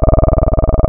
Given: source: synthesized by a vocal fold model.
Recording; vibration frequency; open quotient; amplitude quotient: sustained vowel; 20 Hz; 0.3; 1.3